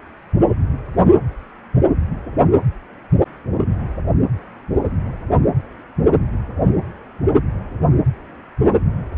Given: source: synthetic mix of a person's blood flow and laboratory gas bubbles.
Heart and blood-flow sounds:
Doppler ultrasound of blood flow; precordium
no bubbles
From the record:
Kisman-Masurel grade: 000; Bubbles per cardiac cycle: 0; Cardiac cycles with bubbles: 0%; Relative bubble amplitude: no bubbles discernible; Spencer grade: 0 (complete lack of bubble signals)

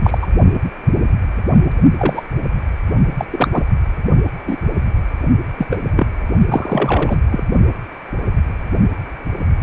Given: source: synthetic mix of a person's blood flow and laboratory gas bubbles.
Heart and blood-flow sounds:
Doppler ultrasound of blood flow; precordium
0.04-0.18 s: bubbles
0.21-0.26 s: bubbles
1.98-2.21 s: bubbles
3.17-3.25 s: bubbles
3.31-3.48 s: bubbles
3.51-3.64 s: bubbles
4.47-4.56 s: bubbles
5.58-5.67 s: bubbles
5.70-5.80 s: bubbles
5.96-6.07 s: bubbles
6.48-7.16 s: bubbles
7.31-7.43 s: bubbles
From the record:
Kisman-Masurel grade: 233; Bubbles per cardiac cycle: several, 3 to 8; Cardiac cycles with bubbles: 50 to 99%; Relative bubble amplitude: loud (0.450 to 0.775); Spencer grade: 3 (all of the cardiac periods contain showers or single bubble signals, but not dominating or overriding the cardiac motion signals); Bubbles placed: only in the low amplitude regions of the cardiac cycle

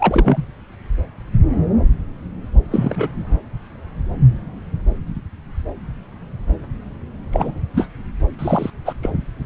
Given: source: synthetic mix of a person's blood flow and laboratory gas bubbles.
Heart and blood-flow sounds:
Doppler ultrasound of blood flow; subclavian vein
0.00-0.42 s: bubbles
2.71-3.25 s: bubbles
7.33-7.59 s: bubbles
7.74-7.87 s: bubbles
8.38-8.71 s: bubbles
8.85-8.93 s: bubbles
9.02-9.10 s: bubbles
From the record:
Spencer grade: 2 (many but less than half of the cardiac periods contain bubble signals, singularly or in groups); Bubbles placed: anywhere in the cardiac cycle

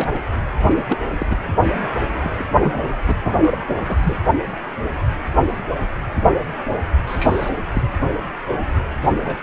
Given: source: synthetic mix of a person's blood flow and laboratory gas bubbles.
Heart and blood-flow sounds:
Doppler ultrasound of blood flow; precordium
0.00-0.07 s: bubbles
0.13-0.20 s: bubbles
0.61-0.82 s: bubbles
0.88-0.97 s: bubbles
1.18-1.26 s: bubbles
1.29-1.36 s: bubbles
2.23-2.44 s: bubbles
2.61-2.94 s: bubbles
3.06-3.15 s: bubbles
3.25-3.59 s: bubbles
3.67-4.17 s: bubbles
7.06-7.50 s: bubbles
7.72-7.83 s: bubbles
9.01-9.12 s: bubbles
9.24-9.37 s: bubbles
From the record:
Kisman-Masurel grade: 232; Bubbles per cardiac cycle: several, 3 to 8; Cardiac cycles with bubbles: 50 to 99%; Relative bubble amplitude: moderate (0.250 to 0.450); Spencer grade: 3 (all of the cardiac periods contain showers or single bubble signals, but not dominating or overriding the cardiac motion signals); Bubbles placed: anywhere in the cardiac cycle

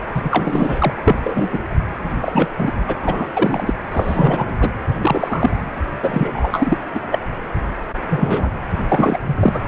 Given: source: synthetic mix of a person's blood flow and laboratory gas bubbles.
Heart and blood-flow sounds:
Doppler ultrasound of blood flow; precordium
0.00-0.04 s: bubbles
0.14-0.94 s: bubbles
1.04-1.16 s: bubbles
1.23-1.49 s: bubbles
1.53-1.59 s: bubbles
2.21-2.51 s: bubbles
2.57-2.71 s: bubbles
2.86-2.97 s: bubbles
3.02-3.27 s: bubbles
3.33-3.73 s: bubbles
3.91-4.57 s: bubbles
4.60-4.71 s: bubbles
5.01-5.64 s: bubbles
6.02-6.78 s: bubbles
6.94-7.00 s: bubbles
7.11-7.20 s: bubbles
8.10-8.49 s: bubbles
8.89-9.19 s: bubbles
9.25-9.63 s: bubbles
From the record:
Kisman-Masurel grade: 233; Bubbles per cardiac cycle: several, 3 to 8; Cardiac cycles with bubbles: 50 to 99%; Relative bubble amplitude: loud (0.450 to 0.775); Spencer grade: 3 (all of the cardiac periods contain showers or single bubble signals, but not dominating or overriding the cardiac motion signals); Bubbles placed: anywhere in the cardiac cycle

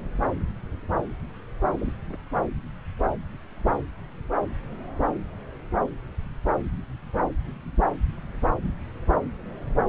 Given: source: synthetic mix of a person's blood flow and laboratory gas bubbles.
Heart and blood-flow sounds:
Doppler ultrasound of blood flow; subclavian vein
1.79-1.92 s: bubbles
2.09-2.17 s: bubbles
2.34-2.42 s: bubbles
From the record:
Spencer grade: 1 (occasional bubble signal discernible with the cardiac motion signal, with majority of cardiac periods free of bubbles); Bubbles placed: anywhere in the cardiac cycle

